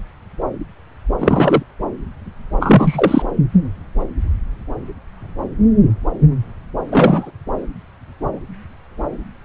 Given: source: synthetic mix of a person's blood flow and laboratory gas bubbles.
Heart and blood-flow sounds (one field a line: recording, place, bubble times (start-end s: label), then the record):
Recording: Doppler ultrasound of blood flow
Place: subclavian vein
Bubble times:
1.18-1.62 s: bubbles
2.59-3.26 s: bubbles
6.91-7.30 s: bubbles
From the record:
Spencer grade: 2 (many but less than half of the cardiac periods contain bubble signals, singularly or in groups)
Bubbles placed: anywhere in the cardiac cycle